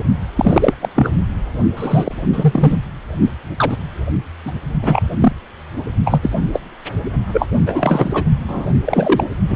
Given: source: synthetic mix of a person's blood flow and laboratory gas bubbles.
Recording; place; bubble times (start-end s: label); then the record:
Doppler ultrasound of blood flow; precordium
0.00-0.03 s: bubbles
0.36-0.74 s: bubbles
0.79-0.89 s: bubbles
0.95-1.18 s: bubbles
1.76-2.12 s: bubbles
2.33-2.76 s: bubbles
3.57-3.77 s: bubbles
4.46-4.52 s: bubbles
4.82-5.03 s: bubbles
5.19-5.33 s: bubbles
6.04-6.31 s: bubbles
6.53-6.59 s: bubbles
7.33-7.49 s: bubbles
7.66-8.25 s: bubbles
8.47-8.66 s: bubbles
8.84-9.26 s: bubbles
9.48-9.56 s: bubbles
From the record:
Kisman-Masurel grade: 243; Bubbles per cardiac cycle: several, 3 to 8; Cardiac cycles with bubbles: 100%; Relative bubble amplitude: loud (0.450 to 0.775); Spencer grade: 3 (all of the cardiac periods contain showers or single bubble signals, but not dominating or overriding the cardiac motion signals); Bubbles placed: only in the low amplitude regions of the cardiac cycle